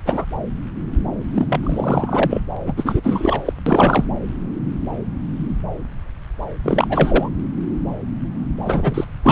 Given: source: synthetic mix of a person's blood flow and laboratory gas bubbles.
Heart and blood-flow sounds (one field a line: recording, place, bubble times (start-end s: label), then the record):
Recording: Doppler ultrasound of blood flow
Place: subclavian vein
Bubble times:
0.06-0.25 s: bubbles
1.33-1.47 s: bubbles
1.49-1.60 s: bubbles
1.63-2.42 s: bubbles
2.66-2.73 s: bubbles
2.76-3.53 s: bubbles
3.66-4.05 s: bubbles
6.63-7.29 s: bubbles
8.64-9.04 s: bubbles
9.23-9.32 s: bubbles
From the record:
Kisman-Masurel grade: 333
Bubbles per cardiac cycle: rolling drumbeat, 9 or more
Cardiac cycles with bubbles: 50 to 99%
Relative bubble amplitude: loud (0.450 to 0.775)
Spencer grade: 3 (all of the cardiac periods contain showers or single bubble signals, but not dominating or overriding the cardiac motion signals)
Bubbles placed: anywhere in the cardiac cycle